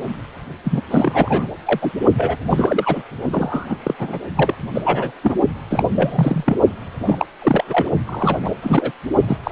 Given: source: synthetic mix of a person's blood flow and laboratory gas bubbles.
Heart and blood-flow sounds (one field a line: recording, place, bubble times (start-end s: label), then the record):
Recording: Doppler ultrasound of blood flow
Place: precordium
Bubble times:
0.64-0.81 s: bubbles
0.90-1.55 s: bubbles
1.65-1.91 s: bubbles
2.17-2.36 s: bubbles
2.50-3.03 s: bubbles
3.31-3.76 s: bubbles
3.83-3.94 s: bubbles
3.98-4.19 s: bubbles
4.35-4.54 s: bubbles
4.74-5.12 s: bubbles
5.23-5.35 s: bubbles
5.70-5.85 s: bubbles
5.93-6.58 s: bubbles
7.00-7.27 s: bubbles
7.42-7.89 s: bubbles
8.07-8.38 s: bubbles
8.42-8.51 s: bubbles
8.62-8.92 s: bubbles
9.28-9.38 s: bubbles
9.44-9.52 s: bubbles
From the record:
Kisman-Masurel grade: 342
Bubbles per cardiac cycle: rolling drumbeat, 9 or more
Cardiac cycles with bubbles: 100%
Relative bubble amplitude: moderate (0.250 to 0.450)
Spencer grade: 3 (all of the cardiac periods contain showers or single bubble signals, but not dominating or overriding the cardiac motion signals)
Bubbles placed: only in the low amplitude regions of the cardiac cycle